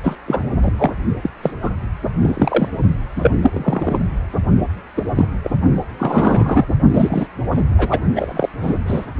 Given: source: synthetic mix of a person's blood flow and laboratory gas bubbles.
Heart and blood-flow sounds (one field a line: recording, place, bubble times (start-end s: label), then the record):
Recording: Doppler ultrasound of blood flow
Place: precordium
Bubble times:
0.03-0.15 s: bubbles
0.26-0.43 s: bubbles
0.62-0.73 s: bubbles
0.77-0.91 s: bubbles
1.22-1.29 s: bubbles
1.42-1.51 s: bubbles
1.62-1.71 s: bubbles
2.22-2.69 s: bubbles
3.16-3.31 s: bubbles
3.43-3.50 s: bubbles
3.53-4.00 s: bubbles
4.97-5.05 s: bubbles
5.15-5.26 s: bubbles
5.44-5.50 s: bubbles
5.98-6.65 s: bubbles
6.92-7.27 s: bubbles
7.51-7.62 s: bubbles
7.78-8.00 s: bubbles
8.15-8.49 s: bubbles
8.61-8.78 s: bubbles
8.87-9.05 s: bubbles
From the record:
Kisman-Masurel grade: 243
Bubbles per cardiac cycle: several, 3 to 8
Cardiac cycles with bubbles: 100%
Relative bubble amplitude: loud (0.450 to 0.775)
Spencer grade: 3 (all of the cardiac periods contain showers or single bubble signals, but not dominating or overriding the cardiac motion signals)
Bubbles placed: only in the low amplitude regions of the cardiac cycle